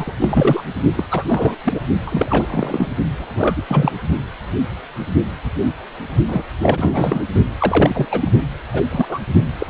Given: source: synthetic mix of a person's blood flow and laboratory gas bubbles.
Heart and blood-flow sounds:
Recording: Doppler ultrasound of blood flow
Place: precordium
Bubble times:
0.00-0.13 s: bubbles
0.21-0.61 s: bubbles
0.96-1.04 s: bubbles
1.11-1.25 s: bubbles
1.29-1.55 s: bubbles
1.64-1.81 s: bubbles
2.06-2.92 s: bubbles
3.18-3.62 s: bubbles
3.67-3.92 s: bubbles
6.28-6.44 s: bubbles
6.62-7.24 s: bubbles
7.58-8.06 s: bubbles
8.11-8.31 s: bubbles
8.73-8.83 s: bubbles
8.91-9.06 s: bubbles
9.08-9.18 s: bubbles
9.58-9.66 s: bubbles
From the record:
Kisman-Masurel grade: 332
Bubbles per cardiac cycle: rolling drumbeat, 9 or more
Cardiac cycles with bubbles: 50 to 99%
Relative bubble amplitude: moderate (0.250 to 0.450)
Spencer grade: 3 (all of the cardiac periods contain showers or single bubble signals, but not dominating or overriding the cardiac motion signals)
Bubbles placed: only in the low amplitude regions of the cardiac cycle

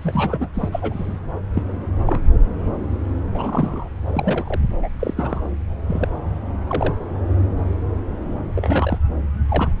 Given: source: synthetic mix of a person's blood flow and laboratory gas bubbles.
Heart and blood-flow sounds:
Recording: Doppler ultrasound of blood flow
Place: subclavian vein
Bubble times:
0.02-0.47 s: bubbles
0.54-0.69 s: bubbles
0.71-1.18 s: bubbles
1.54-1.62 s: bubbles
2.05-2.25 s: bubbles
3.33-3.88 s: bubbles
4.06-4.60 s: bubbles
4.82-4.88 s: bubbles
5.00-5.14 s: bubbles
5.17-5.42 s: bubbles
5.87-6.08 s: bubbles
6.67-6.95 s: bubbles
8.56-8.99 s: bubbles
9.49-9.73 s: bubbles
From the record:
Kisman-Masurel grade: 232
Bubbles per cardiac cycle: several, 3 to 8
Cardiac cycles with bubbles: 50 to 99%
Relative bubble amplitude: moderate (0.250 to 0.450)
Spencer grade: 3 (all of the cardiac periods contain showers or single bubble signals, but not dominating or overriding the cardiac motion signals)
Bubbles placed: anywhere in the cardiac cycle

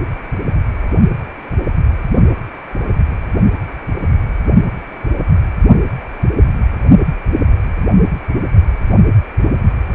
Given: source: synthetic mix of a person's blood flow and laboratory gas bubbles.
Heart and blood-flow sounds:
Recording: Doppler ultrasound of blood flow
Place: precordium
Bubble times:
no bubbles
From the record:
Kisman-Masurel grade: 000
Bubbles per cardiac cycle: 0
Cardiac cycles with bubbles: 0%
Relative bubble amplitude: no bubbles discernible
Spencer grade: 0 (complete lack of bubble signals)

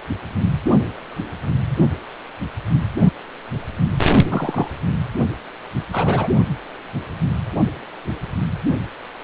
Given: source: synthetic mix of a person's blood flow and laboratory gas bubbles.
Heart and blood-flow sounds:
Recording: Doppler ultrasound of blood flow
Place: precordium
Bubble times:
4.29-4.68 s: bubbles
5.92-6.29 s: bubbles
From the record:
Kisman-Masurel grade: 113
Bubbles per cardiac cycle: 1 to 2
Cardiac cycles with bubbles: 1 to 10%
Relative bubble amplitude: loud (0.450 to 0.775)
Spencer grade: 1 (occasional bubble signal discernible with the cardiac motion signal, with majority of cardiac periods free of bubbles)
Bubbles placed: only in the low amplitude regions of the cardiac cycle

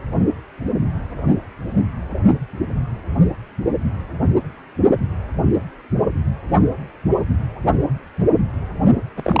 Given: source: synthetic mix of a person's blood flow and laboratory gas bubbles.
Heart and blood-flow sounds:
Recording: Doppler ultrasound of blood flow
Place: precordium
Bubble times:
9.16-9.40 s: bubbles
From the record:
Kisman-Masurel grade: 212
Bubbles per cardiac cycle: several, 3 to 8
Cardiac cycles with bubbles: 1 to 10%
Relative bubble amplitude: moderate (0.250 to 0.450)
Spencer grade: 1 (occasional bubble signal discernible with the cardiac motion signal, with majority of cardiac periods free of bubbles)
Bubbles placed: only in the low amplitude regions of the cardiac cycle

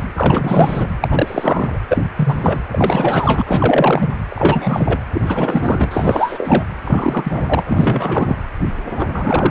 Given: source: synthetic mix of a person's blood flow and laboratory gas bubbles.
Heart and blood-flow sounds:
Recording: Doppler ultrasound of blood flow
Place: precordium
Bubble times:
0.15-0.88 s: bubbles
1.00-1.80 s: bubbles
1.89-2.04 s: bubbles
2.16-2.59 s: bubbles
2.71-3.43 s: bubbles
3.46-4.10 s: bubbles
4.29-5.00 s: bubbles
5.12-5.21 s: bubbles
5.26-6.64 s: bubbles
6.81-7.63 s: bubbles
7.68-8.36 s: bubbles
8.92-9.51 s: bubbles
From the record:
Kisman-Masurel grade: 343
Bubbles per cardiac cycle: rolling drumbeat, 9 or more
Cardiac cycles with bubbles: 100%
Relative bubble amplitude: loud (0.450 to 0.775)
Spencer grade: 3 (all of the cardiac periods contain showers or single bubble signals, but not dominating or overriding the cardiac motion signals)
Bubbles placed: anywhere in the cardiac cycle

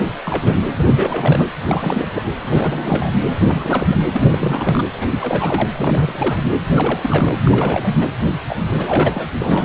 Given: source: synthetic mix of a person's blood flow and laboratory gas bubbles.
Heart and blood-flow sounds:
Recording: Doppler ultrasound of blood flow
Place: precordium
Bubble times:
0.00-0.15 s: bubbles
0.25-0.56 s: bubbles
0.77-1.47 s: bubbles
1.57-2.08 s: bubbles
2.15-2.22 s: bubbles
2.42-3.11 s: bubbles
3.39-3.97 s: bubbles
4.12-4.84 s: bubbles
4.93-5.08 s: bubbles
5.10-5.69 s: bubbles
5.72-6.45 s: bubbles
6.69-7.00 s: bubbles
7.03-7.36 s: bubbles
7.43-7.92 s: bubbles
7.97-8.07 s: bubbles
8.48-8.56 s: bubbles
8.72-9.28 s: bubbles
9.39-9.65 s: bubbles
From the record:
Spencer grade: 3 (all of the cardiac periods contain showers or single bubble signals, but not dominating or overriding the cardiac motion signals)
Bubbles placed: anywhere in the cardiac cycle

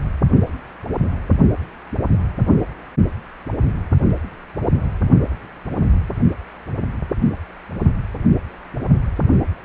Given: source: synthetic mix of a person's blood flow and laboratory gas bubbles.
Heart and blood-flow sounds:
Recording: Doppler ultrasound of blood flow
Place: precordium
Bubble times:
no bubbles
From the record:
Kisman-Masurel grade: 000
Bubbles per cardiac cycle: 0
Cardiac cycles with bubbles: 0%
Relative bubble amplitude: no bubbles discernible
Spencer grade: 0 (complete lack of bubble signals)

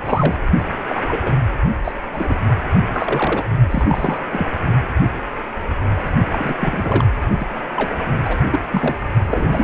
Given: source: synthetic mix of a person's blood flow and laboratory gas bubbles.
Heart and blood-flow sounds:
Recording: Doppler ultrasound of blood flow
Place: precordium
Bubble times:
0.05-0.36 s: bubbles
0.89-1.03 s: bubbles
1.06-1.36 s: bubbles
1.84-1.92 s: bubbles
2.13-2.35 s: bubbles
2.93-3.43 s: bubbles
3.71-4.18 s: bubbles
4.32-4.50 s: bubbles
6.31-6.53 s: bubbles
6.60-7.04 s: bubbles
7.39-7.47 s: bubbles
7.76-7.91 s: bubbles
8.25-8.38 s: bubbles
8.52-8.59 s: bubbles
8.71-8.96 s: bubbles
9.27-9.64 s: bubbles
From the record:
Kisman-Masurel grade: 232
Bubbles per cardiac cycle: several, 3 to 8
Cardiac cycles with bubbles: 50 to 99%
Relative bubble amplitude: moderate (0.250 to 0.450)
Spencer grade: 3 (all of the cardiac periods contain showers or single bubble signals, but not dominating or overriding the cardiac motion signals)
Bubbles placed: only in the low amplitude regions of the cardiac cycle

